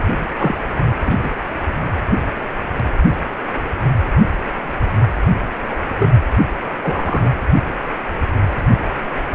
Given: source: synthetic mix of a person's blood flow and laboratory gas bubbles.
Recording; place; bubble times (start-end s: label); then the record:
Doppler ultrasound of blood flow; precordium
0.37-0.54 s: bubbles
1.05-1.17 s: bubbles
1.23-1.30 s: bubbles
5.70-5.85 s: bubbles
6.00-6.08 s: bubbles
6.83-7.31 s: bubbles
From the record:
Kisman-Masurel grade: 122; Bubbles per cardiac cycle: 1 to 2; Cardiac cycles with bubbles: 10 to 50%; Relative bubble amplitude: moderate (0.250 to 0.450); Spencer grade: 2 (many but less than half of the cardiac periods contain bubble signals, singularly or in groups); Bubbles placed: anywhere in the cardiac cycle